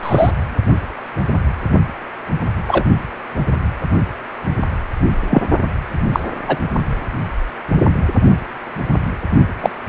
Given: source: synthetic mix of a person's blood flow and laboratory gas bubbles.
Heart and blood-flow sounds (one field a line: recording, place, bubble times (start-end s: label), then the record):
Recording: Doppler ultrasound of blood flow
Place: precordium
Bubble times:
0.03-0.31 s: bubbles
2.67-2.84 s: bubbles
5.30-5.42 s: bubbles
6.12-6.20 s: bubbles
6.47-6.57 s: bubbles
9.61-9.70 s: bubbles
From the record:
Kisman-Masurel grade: 123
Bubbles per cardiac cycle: 1 to 2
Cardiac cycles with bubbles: 10 to 50%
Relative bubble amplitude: loud (0.450 to 0.775)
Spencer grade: 2 (many but less than half of the cardiac periods contain bubble signals, singularly or in groups)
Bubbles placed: only in the low amplitude regions of the cardiac cycle